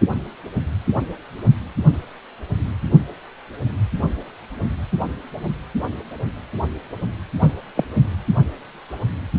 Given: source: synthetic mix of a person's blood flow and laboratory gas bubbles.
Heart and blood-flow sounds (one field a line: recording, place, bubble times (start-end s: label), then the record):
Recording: Doppler ultrasound of blood flow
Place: precordium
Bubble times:
7.40-7.53 s: bubbles
7.75-7.85 s: bubbles
From the record:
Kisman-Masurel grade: 123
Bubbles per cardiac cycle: 1 to 2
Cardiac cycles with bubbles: 10 to 50%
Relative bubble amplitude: loud (0.450 to 0.775)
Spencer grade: 2 (many but less than half of the cardiac periods contain bubble signals, singularly or in groups)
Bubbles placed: only in the low amplitude regions of the cardiac cycle